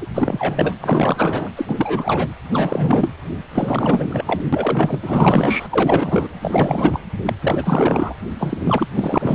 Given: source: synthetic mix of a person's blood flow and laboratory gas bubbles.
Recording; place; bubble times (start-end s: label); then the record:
Doppler ultrasound of blood flow; precordium
0.00-0.07 s: bubbles
0.14-0.74 s: bubbles
0.80-1.50 s: bubbles
1.56-2.28 s: bubbles
2.51-3.09 s: bubbles
3.53-4.40 s: bubbles
4.52-4.99 s: bubbles
5.02-6.28 s: bubbles
6.42-7.02 s: bubbles
7.25-7.33 s: bubbles
7.42-8.15 s: bubbles
8.38-8.57 s: bubbles
8.65-8.88 s: bubbles
8.94-9.35 s: bubbles
From the record:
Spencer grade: 4 (maximum detectable bubble signal sounding continuously throughout systole and diastole of every cardiac period, and overriding the amplitude of the normal cardiac signals); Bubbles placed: anywhere in the cardiac cycle